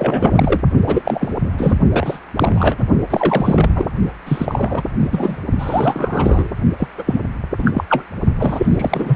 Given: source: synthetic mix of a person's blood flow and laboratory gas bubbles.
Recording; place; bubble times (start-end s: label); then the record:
Doppler ultrasound of blood flow; precordium
0.00-0.60 s: bubbles
0.86-1.02 s: bubbles
1.04-1.34 s: bubbles
1.58-1.76 s: bubbles
1.91-2.19 s: bubbles
2.36-2.84 s: bubbles
3.10-3.70 s: bubbles
3.75-3.87 s: bubbles
4.25-4.83 s: bubbles
5.00-5.40 s: bubbles
5.58-6.51 s: bubbles
6.76-6.88 s: bubbles
6.97-7.04 s: bubbles
7.06-7.21 s: bubbles
7.58-7.84 s: bubbles
7.89-8.04 s: bubbles
8.34-9.16 s: bubbles
From the record:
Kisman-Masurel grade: 343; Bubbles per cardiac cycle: rolling drumbeat, 9 or more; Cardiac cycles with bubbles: 100%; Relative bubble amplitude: loud (0.450 to 0.775); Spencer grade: 3 (all of the cardiac periods contain showers or single bubble signals, but not dominating or overriding the cardiac motion signals); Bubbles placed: only in the low amplitude regions of the cardiac cycle